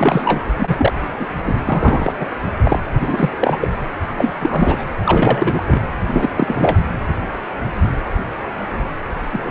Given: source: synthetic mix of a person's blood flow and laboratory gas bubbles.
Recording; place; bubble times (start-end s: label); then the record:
Doppler ultrasound of blood flow; precordium
0.00-0.45 s: bubbles
0.56-0.93 s: bubbles
1.19-1.27 s: bubbles
1.45-1.54 s: bubbles
1.65-2.12 s: bubbles
2.19-2.27 s: bubbles
2.65-2.79 s: bubbles
3.00-3.30 s: bubbles
3.40-3.58 s: bubbles
3.61-3.69 s: bubbles
4.08-4.14 s: bubbles
4.17-4.30 s: bubbles
4.36-4.85 s: bubbles
5.04-5.62 s: bubbles
5.67-5.82 s: bubbles
6.12-6.29 s: bubbles
6.34-6.78 s: bubbles
9.32-9.51 s: bubbles
From the record:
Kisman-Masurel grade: 333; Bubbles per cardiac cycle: rolling drumbeat, 9 or more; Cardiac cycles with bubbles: 50 to 99%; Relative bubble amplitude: loud (0.450 to 0.775); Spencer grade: 3 (all of the cardiac periods contain showers or single bubble signals, but not dominating or overriding the cardiac motion signals); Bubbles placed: anywhere in the cardiac cycle